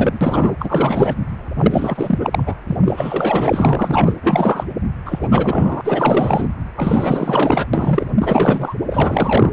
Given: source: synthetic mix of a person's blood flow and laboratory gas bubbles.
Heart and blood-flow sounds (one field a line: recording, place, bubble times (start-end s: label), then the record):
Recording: Doppler ultrasound of blood flow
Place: precordium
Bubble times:
0.00-0.55 s: bubbles
0.59-1.15 s: bubbles
1.56-2.54 s: bubbles
2.67-2.77 s: bubbles
2.85-4.15 s: bubbles
4.23-4.65 s: bubbles
5.05-5.81 s: bubbles
5.84-6.49 s: bubbles
6.76-7.67 s: bubbles
7.73-8.11 s: bubbles
8.21-8.75 s: bubbles
8.90-9.52 s: bubbles
From the record:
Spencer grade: 4 (maximum detectable bubble signal sounding continuously throughout systole and diastole of every cardiac period, and overriding the amplitude of the normal cardiac signals)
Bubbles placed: anywhere in the cardiac cycle